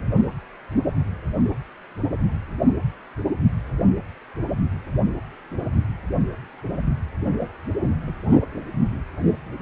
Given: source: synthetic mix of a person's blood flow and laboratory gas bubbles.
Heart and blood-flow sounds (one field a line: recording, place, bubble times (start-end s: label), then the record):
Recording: Doppler ultrasound of blood flow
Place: precordium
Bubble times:
no bubbles
From the record:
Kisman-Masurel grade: 000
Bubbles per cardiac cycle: 0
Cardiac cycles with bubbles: 0%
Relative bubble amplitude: no bubbles discernible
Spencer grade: 0 (complete lack of bubble signals)